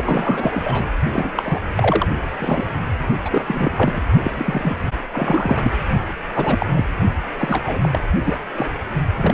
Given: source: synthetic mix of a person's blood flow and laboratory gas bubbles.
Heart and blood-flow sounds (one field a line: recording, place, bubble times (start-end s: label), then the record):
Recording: Doppler ultrasound of blood flow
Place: precordium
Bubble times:
0.00-0.86 s: bubbles
1.13-1.30 s: bubbles
1.35-1.60 s: bubbles
1.76-2.08 s: bubbles
2.39-2.70 s: bubbles
3.25-3.45 s: bubbles
3.47-4.01 s: bubbles
4.24-4.31 s: bubbles
4.34-4.84 s: bubbles
5.12-5.71 s: bubbles
6.34-6.66 s: bubbles
6.75-6.86 s: bubbles
7.38-7.89 s: bubbles
7.92-7.99 s: bubbles
8.25-8.38 s: bubbles
8.55-8.68 s: bubbles
9.18-9.34 s: bubbles
From the record:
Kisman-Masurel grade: 343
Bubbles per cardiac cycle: rolling drumbeat, 9 or more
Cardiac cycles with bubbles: 100%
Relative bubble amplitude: loud (0.450 to 0.775)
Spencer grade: 3 (all of the cardiac periods contain showers or single bubble signals, but not dominating or overriding the cardiac motion signals)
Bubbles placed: only in the low amplitude regions of the cardiac cycle